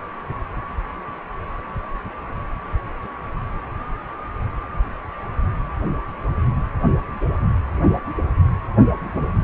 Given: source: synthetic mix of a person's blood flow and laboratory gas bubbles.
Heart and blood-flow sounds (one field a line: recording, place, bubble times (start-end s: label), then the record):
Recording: Doppler ultrasound of blood flow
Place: precordium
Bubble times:
no bubbles
From the record:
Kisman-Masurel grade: 000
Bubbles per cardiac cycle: 0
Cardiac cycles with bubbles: 0%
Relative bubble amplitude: no bubbles discernible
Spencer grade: 0 (complete lack of bubble signals)